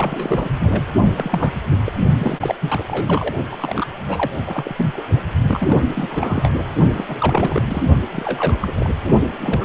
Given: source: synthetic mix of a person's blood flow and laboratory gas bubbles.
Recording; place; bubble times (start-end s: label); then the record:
Doppler ultrasound of blood flow; precordium
0.00-0.52 s: bubbles
0.59-0.82 s: bubbles
1.15-1.54 s: bubbles
1.70-1.78 s: bubbles
1.85-1.93 s: bubbles
2.18-2.55 s: bubbles
2.62-2.84 s: bubbles
2.87-3.35 s: bubbles
3.51-3.87 s: bubbles
4.08-4.30 s: bubbles
4.44-5.04 s: bubbles
5.46-6.51 s: bubbles
6.58-6.63 s: bubbles
6.92-7.62 s: bubbles
7.67-7.84 s: bubbles
8.12-8.72 s: bubbles
8.76-8.90 s: bubbles
9.41-9.65 s: bubbles
From the record:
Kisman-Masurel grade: 342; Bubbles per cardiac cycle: rolling drumbeat, 9 or more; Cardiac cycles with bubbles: 100%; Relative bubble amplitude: moderate (0.250 to 0.450); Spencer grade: 3 (all of the cardiac periods contain showers or single bubble signals, but not dominating or overriding the cardiac motion signals); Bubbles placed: only in the low amplitude regions of the cardiac cycle